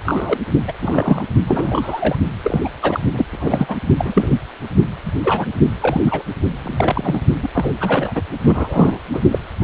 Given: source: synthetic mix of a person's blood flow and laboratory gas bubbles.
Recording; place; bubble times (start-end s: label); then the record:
Doppler ultrasound of blood flow; precordium
0.04-0.38 s: bubbles
0.67-0.72 s: bubbles
0.81-1.27 s: bubbles
1.47-2.17 s: bubbles
2.44-2.69 s: bubbles
2.82-3.00 s: bubbles
3.13-3.26 s: bubbles
3.32-3.77 s: bubbles
3.98-4.39 s: bubbles
5.05-5.12 s: bubbles
5.24-5.46 s: bubbles
5.80-6.22 s: bubbles
6.63-7.22 s: bubbles
7.42-7.49 s: bubbles
7.54-7.75 s: bubbles
7.81-8.22 s: bubbles
8.44-9.00 s: bubbles
9.13-9.21 s: bubbles
9.31-9.38 s: bubbles
9.61-9.64 s: bubbles
From the record:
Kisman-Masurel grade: 242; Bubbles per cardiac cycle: several, 3 to 8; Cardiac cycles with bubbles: 100%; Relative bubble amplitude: moderate (0.250 to 0.450); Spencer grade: 3 (all of the cardiac periods contain showers or single bubble signals, but not dominating or overriding the cardiac motion signals); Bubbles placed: only in the low amplitude regions of the cardiac cycle